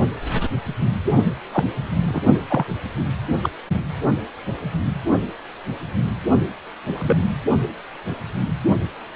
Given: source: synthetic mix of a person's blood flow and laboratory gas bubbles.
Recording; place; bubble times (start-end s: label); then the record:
Doppler ultrasound of blood flow; precordium
1.52-1.65 s: bubbles
2.08-2.22 s: bubbles
2.49-2.65 s: bubbles
3.43-3.50 s: bubbles
6.94-7.22 s: bubbles
From the record:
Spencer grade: 2 (many but less than half of the cardiac periods contain bubble signals, singularly or in groups); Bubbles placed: only in the low amplitude regions of the cardiac cycle